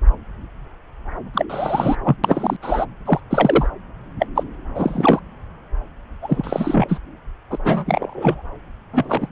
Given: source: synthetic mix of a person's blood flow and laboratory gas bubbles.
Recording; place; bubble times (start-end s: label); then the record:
Doppler ultrasound of blood flow; subclavian vein
1.33-1.46 s: bubbles
1.50-1.96 s: bubbles
2.04-2.17 s: bubbles
2.23-2.56 s: bubbles
2.62-2.85 s: bubbles
3.05-3.21 s: bubbles
3.29-3.68 s: bubbles
4.19-4.26 s: bubbles
4.35-4.43 s: bubbles
4.75-5.20 s: bubbles
6.22-6.99 s: bubbles
7.50-7.57 s: bubbles
7.64-8.43 s: bubbles
8.93-9.28 s: bubbles
From the record:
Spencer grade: 3 (all of the cardiac periods contain showers or single bubble signals, but not dominating or overriding the cardiac motion signals); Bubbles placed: anywhere in the cardiac cycle